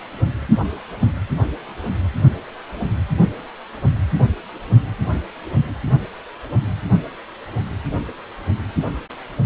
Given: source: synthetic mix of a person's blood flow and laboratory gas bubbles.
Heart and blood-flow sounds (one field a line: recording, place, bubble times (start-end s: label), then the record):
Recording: Doppler ultrasound of blood flow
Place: precordium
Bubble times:
4.14-4.25 s: bubbles
From the record:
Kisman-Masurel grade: 113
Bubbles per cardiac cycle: 1 to 2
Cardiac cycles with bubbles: 1 to 10%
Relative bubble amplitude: loud (0.450 to 0.775)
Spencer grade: 1 (occasional bubble signal discernible with the cardiac motion signal, with majority of cardiac periods free of bubbles)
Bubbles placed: anywhere in the cardiac cycle